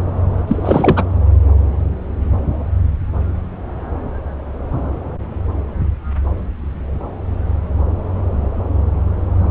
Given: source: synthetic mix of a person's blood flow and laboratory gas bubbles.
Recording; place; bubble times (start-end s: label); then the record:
Doppler ultrasound of blood flow; subclavian vein
0.47-1.04 s: bubbles
From the record:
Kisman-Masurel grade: 213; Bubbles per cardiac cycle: several, 3 to 8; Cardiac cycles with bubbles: 1 to 10%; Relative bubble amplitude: loud (0.450 to 0.775); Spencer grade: 1 (occasional bubble signal discernible with the cardiac motion signal, with majority of cardiac periods free of bubbles); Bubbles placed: anywhere in the cardiac cycle